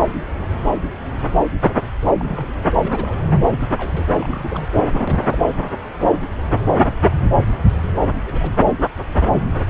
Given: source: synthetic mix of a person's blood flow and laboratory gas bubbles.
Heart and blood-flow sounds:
Doppler ultrasound of blood flow; subclavian vein
2.20-2.53 s: bubbles
2.77-3.18 s: bubbles
3.46-3.72 s: bubbles
3.77-4.04 s: bubbles
4.14-4.67 s: bubbles
4.92-5.55 s: bubbles
8.22-8.56 s: bubbles
From the record:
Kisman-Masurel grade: 221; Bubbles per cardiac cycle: several, 3 to 8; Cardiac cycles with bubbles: 10 to 50%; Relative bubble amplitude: barely perceptible (0.100 to 0.250); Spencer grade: 2 (many but less than half of the cardiac periods contain bubble signals, singularly or in groups); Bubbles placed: anywhere in the cardiac cycle

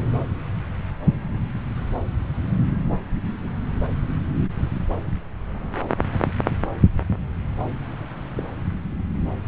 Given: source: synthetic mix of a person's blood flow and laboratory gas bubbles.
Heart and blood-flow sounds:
Doppler ultrasound of blood flow; subclavian vein
8.37-8.49 s: bubbles
From the record:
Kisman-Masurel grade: 111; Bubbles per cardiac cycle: 1 to 2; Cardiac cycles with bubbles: 1 to 10%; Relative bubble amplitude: barely perceptible (0.100 to 0.250); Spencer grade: 1 (occasional bubble signal discernible with the cardiac motion signal, with majority of cardiac periods free of bubbles); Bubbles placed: anywhere in the cardiac cycle

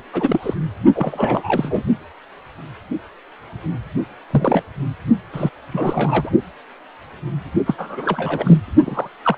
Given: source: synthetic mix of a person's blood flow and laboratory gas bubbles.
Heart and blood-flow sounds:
Doppler ultrasound of blood flow; precordium
0.12-0.54 s: bubbles
0.94-1.83 s: bubbles
4.30-4.63 s: bubbles
5.33-5.50 s: bubbles
5.72-6.31 s: bubbles
7.66-7.75 s: bubbles
7.78-8.58 s: bubbles
8.85-9.08 s: bubbles
9.22-9.38 s: bubbles
From the record:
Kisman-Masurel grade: 232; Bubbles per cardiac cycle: several, 3 to 8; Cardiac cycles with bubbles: 50 to 99%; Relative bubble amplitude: moderate (0.250 to 0.450); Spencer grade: 3 (all of the cardiac periods contain showers or single bubble signals, but not dominating or overriding the cardiac motion signals); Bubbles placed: only in the low amplitude regions of the cardiac cycle

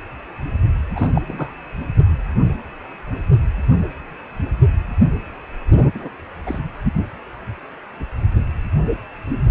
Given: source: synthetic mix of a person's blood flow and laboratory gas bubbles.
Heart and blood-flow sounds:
Doppler ultrasound of blood flow; precordium
0.95-1.12 s: bubbles
1.15-1.22 s: bubbles
1.28-1.52 s: bubbles
5.94-6.08 s: bubbles
6.46-6.59 s: bubbles
From the record:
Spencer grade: 2 (many but less than half of the cardiac periods contain bubble signals, singularly or in groups); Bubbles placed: only in the low amplitude regions of the cardiac cycle

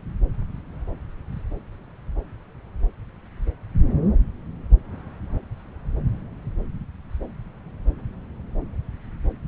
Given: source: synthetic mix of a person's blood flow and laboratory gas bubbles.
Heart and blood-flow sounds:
Doppler ultrasound of blood flow; subclavian vein
no bubbles
From the record:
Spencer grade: 0 (complete lack of bubble signals)

